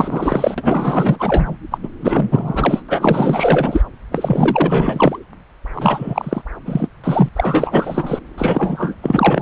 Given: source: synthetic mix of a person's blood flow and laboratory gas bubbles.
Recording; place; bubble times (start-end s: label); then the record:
Doppler ultrasound of blood flow; subclavian vein
0.00-0.54 s: bubbles
0.57-1.56 s: bubbles
1.71-1.77 s: bubbles
1.83-1.89 s: bubbles
2.00-2.83 s: bubbles
2.89-3.81 s: bubbles
4.11-5.19 s: bubbles
5.74-6.42 s: bubbles
6.65-6.87 s: bubbles
7.03-7.29 s: bubbles
7.35-8.19 s: bubbles
8.38-8.95 s: bubbles
9.03-9.42 s: bubbles
From the record:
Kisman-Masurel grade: 444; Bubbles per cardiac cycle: continuous sound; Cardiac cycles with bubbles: 100%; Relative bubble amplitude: maximal (0.775 to 0.999); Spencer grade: 4 (maximum detectable bubble signal sounding continuously throughout systole and diastole of every cardiac period, and overriding the amplitude of the normal cardiac signals); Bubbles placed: anywhere in the cardiac cycle